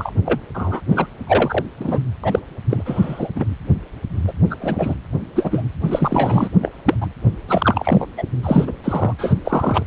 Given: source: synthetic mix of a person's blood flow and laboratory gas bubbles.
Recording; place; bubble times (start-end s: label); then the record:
Doppler ultrasound of blood flow; precordium
0.00-0.12 s: bubbles
0.25-0.40 s: bubbles
0.54-0.81 s: bubbles
0.90-1.07 s: bubbles
1.27-1.65 s: bubbles
1.80-2.00 s: bubbles
2.23-2.39 s: bubbles
2.69-2.83 s: bubbles
2.85-3.28 s: bubbles
3.35-3.44 s: bubbles
4.27-4.33 s: bubbles
4.50-4.56 s: bubbles
4.61-4.95 s: bubbles
5.35-5.65 s: bubbles
5.83-6.49 s: bubbles
6.62-6.72 s: bubbles
6.86-6.95 s: bubbles
7.01-7.08 s: bubbles
7.49-8.06 s: bubbles
8.17-8.23 s: bubbles
8.43-8.72 s: bubbles
8.84-9.14 s: bubbles
9.19-9.35 s: bubbles
9.45-9.84 s: bubbles
From the record:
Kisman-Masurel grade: 233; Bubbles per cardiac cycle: several, 3 to 8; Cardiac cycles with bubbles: 50 to 99%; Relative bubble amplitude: loud (0.450 to 0.775); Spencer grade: 3 (all of the cardiac periods contain showers or single bubble signals, but not dominating or overriding the cardiac motion signals); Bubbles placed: anywhere in the cardiac cycle